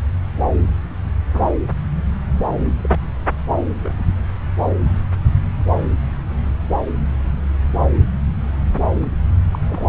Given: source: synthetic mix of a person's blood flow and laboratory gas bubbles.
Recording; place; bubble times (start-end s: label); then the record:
Doppler ultrasound of blood flow; subclavian vein
1.33-1.50 s: bubbles
2.81-2.98 s: bubbles
3.57-3.65 s: bubbles
3.83-3.94 s: bubbles
9.51-9.59 s: bubbles
9.69-9.85 s: bubbles
From the record:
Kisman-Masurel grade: 121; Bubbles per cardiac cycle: 1 to 2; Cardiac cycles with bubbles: 10 to 50%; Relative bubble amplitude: barely perceptible (0.100 to 0.250); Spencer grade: 2 (many but less than half of the cardiac periods contain bubble signals, singularly or in groups); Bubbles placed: anywhere in the cardiac cycle